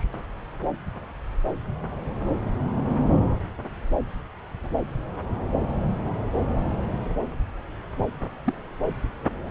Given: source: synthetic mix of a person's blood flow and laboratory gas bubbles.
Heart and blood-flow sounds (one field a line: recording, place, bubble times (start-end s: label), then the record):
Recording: Doppler ultrasound of blood flow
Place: subclavian vein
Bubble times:
0.00-0.03 s: bubbles
0.07-0.10 s: bubbles
8.46-8.54 s: bubbles
From the record:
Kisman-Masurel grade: 111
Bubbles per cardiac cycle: 1 to 2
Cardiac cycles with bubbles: 1 to 10%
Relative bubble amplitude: barely perceptible (0.100 to 0.250)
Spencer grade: 1 (occasional bubble signal discernible with the cardiac motion signal, with majority of cardiac periods free of bubbles)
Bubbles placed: anywhere in the cardiac cycle